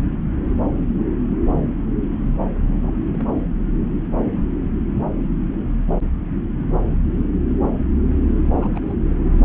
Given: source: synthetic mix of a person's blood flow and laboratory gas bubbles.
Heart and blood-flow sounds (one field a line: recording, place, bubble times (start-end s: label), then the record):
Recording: Doppler ultrasound of blood flow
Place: subclavian vein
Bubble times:
2.83-2.91 s: bubbles
3.12-3.44 s: bubbles
8.56-8.95 s: bubbles
From the record:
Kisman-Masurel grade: 121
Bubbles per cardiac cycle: 1 to 2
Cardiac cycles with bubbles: 10 to 50%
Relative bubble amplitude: barely perceptible (0.100 to 0.250)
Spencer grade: 2 (many but less than half of the cardiac periods contain bubble signals, singularly or in groups)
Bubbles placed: anywhere in the cardiac cycle